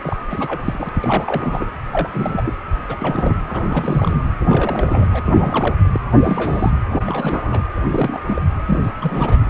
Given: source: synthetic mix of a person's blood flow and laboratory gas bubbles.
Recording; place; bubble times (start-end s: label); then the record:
Doppler ultrasound of blood flow; precordium
0.02-0.17 s: bubbles
0.30-0.89 s: bubbles
0.94-1.65 s: bubbles
1.92-2.08 s: bubbles
2.12-2.42 s: bubbles
2.45-2.53 s: bubbles
2.89-3.38 s: bubbles
3.48-4.18 s: bubbles
4.41-5.07 s: bubbles
5.11-5.22 s: bubbles
5.25-5.75 s: bubbles
5.93-6.00 s: bubbles
6.17-6.71 s: bubbles
6.88-7.62 s: bubbles
7.76-8.21 s: bubbles
8.28-8.41 s: bubbles
8.67-8.92 s: bubbles
9.01-9.46 s: bubbles
From the record:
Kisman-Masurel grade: 342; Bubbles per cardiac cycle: rolling drumbeat, 9 or more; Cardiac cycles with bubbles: 100%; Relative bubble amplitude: moderate (0.250 to 0.450); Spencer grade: 3 (all of the cardiac periods contain showers or single bubble signals, but not dominating or overriding the cardiac motion signals); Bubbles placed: anywhere in the cardiac cycle